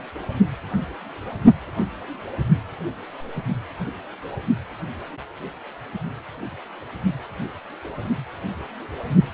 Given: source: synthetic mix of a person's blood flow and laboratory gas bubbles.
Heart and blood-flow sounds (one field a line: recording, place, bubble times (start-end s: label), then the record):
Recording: Doppler ultrasound of blood flow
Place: precordium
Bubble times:
no bubbles
From the record:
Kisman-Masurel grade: 000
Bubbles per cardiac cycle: 0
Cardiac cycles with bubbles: 0%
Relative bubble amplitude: no bubbles discernible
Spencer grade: 0 (complete lack of bubble signals)